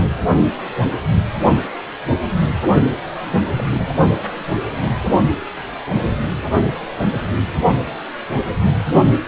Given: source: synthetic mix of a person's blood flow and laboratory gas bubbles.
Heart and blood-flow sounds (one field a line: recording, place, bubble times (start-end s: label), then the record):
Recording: Doppler ultrasound of blood flow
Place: precordium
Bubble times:
2.91-3.00 s: bubbles
3.54-3.93 s: bubbles
From the record:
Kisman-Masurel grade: 211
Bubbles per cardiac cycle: several, 3 to 8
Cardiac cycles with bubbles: 1 to 10%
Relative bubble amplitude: barely perceptible (0.100 to 0.250)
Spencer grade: 1 (occasional bubble signal discernible with the cardiac motion signal, with majority of cardiac periods free of bubbles)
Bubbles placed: only in the low amplitude regions of the cardiac cycle